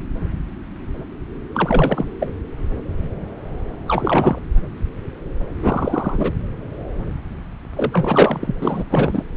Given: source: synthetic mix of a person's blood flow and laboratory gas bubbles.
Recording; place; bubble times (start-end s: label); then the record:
Doppler ultrasound of blood flow; subclavian vein
1.54-2.13 s: bubbles
2.21-2.34 s: bubbles
3.88-4.38 s: bubbles
5.62-6.33 s: bubbles
7.73-8.55 s: bubbles
8.62-8.83 s: bubbles
8.90-9.24 s: bubbles
From the record:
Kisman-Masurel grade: 332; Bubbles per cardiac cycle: rolling drumbeat, 9 or more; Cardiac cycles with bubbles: 50 to 99%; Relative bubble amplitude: moderate (0.250 to 0.450); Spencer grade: 3 (all of the cardiac periods contain showers or single bubble signals, but not dominating or overriding the cardiac motion signals); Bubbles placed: anywhere in the cardiac cycle